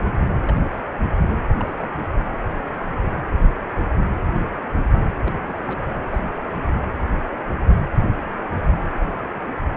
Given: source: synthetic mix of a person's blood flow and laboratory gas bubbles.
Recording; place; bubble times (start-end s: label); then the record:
Doppler ultrasound of blood flow; precordium
0.46-0.61 s: bubbles
0.72-0.79 s: bubbles
1.58-1.72 s: bubbles
1.79-1.88 s: bubbles
5.19-5.34 s: bubbles
5.44-5.63 s: bubbles
5.67-5.79 s: bubbles
6.10-6.18 s: bubbles
6.42-6.65 s: bubbles
6.82-6.86 s: bubbles
From the record:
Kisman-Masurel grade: 221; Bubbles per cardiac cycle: several, 3 to 8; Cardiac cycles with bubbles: 10 to 50%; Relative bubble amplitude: barely perceptible (0.100 to 0.250); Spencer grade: 2 (many but less than half of the cardiac periods contain bubble signals, singularly or in groups); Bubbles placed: anywhere in the cardiac cycle